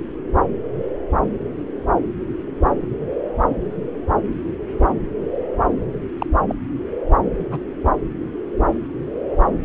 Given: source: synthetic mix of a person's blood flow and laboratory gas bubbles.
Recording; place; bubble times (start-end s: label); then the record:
Doppler ultrasound of blood flow; subclavian vein
6.18-6.26 s: bubbles
6.48-6.55 s: bubbles
7.51-7.59 s: bubbles
From the record:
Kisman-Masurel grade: 122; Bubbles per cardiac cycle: 1 to 2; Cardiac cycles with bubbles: 10 to 50%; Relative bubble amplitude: moderate (0.250 to 0.450); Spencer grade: 2 (many but less than half of the cardiac periods contain bubble signals, singularly or in groups); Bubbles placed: anywhere in the cardiac cycle